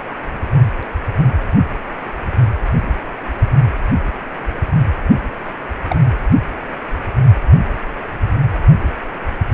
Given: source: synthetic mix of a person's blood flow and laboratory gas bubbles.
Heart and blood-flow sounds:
Doppler ultrasound of blood flow; precordium
5.89-5.96 s: bubbles
From the record:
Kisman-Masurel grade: 112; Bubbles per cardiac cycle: 1 to 2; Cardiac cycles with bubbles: 1 to 10%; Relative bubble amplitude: moderate (0.250 to 0.450); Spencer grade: 1 (occasional bubble signal discernible with the cardiac motion signal, with majority of cardiac periods free of bubbles); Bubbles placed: anywhere in the cardiac cycle

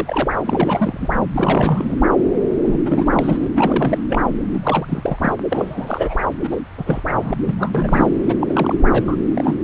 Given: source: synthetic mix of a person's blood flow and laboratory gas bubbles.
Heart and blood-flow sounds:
Doppler ultrasound of blood flow; subclavian vein
0.00-0.30 s: bubbles
0.44-1.08 s: bubbles
1.34-1.95 s: bubbles
2.60-2.78 s: bubbles
2.84-3.49 s: bubbles
3.55-4.00 s: bubbles
4.08-4.22 s: bubbles
4.52-4.85 s: bubbles
4.88-5.35 s: bubbles
5.48-6.17 s: bubbles
6.43-6.57 s: bubbles
6.77-7.01 s: bubbles
7.16-7.34 s: bubbles
7.44-8.09 s: bubbles
8.28-8.35 s: bubbles
8.40-9.16 s: bubbles
9.25-9.56 s: bubbles
From the record:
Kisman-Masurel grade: 342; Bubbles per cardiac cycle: rolling drumbeat, 9 or more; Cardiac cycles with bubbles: 100%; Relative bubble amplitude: moderate (0.250 to 0.450); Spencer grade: 3 (all of the cardiac periods contain showers or single bubble signals, but not dominating or overriding the cardiac motion signals); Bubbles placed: anywhere in the cardiac cycle

